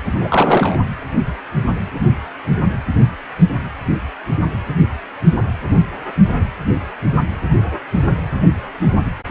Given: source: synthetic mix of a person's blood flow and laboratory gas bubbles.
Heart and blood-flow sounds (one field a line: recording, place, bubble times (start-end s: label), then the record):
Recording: Doppler ultrasound of blood flow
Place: precordium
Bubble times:
0.20-0.78 s: bubbles
From the record:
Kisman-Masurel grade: 213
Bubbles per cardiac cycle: several, 3 to 8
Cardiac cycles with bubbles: 1 to 10%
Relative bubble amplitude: loud (0.450 to 0.775)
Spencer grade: 1 (occasional bubble signal discernible with the cardiac motion signal, with majority of cardiac periods free of bubbles)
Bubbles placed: anywhere in the cardiac cycle